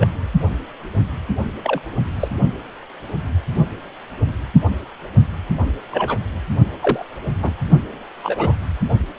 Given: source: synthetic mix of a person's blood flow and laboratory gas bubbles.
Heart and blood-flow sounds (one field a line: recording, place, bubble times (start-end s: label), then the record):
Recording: Doppler ultrasound of blood flow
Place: precordium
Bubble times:
0.00-0.07 s: bubbles
1.64-1.81 s: bubbles
2.19-2.29 s: bubbles
5.91-6.19 s: bubbles
6.81-7.06 s: bubbles
7.43-7.54 s: bubbles
8.23-8.55 s: bubbles
8.89-8.95 s: bubbles
From the record:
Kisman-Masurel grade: 122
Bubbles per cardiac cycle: 1 to 2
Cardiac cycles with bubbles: 10 to 50%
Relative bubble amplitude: moderate (0.250 to 0.450)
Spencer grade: 2 (many but less than half of the cardiac periods contain bubble signals, singularly or in groups)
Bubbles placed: only in the low amplitude regions of the cardiac cycle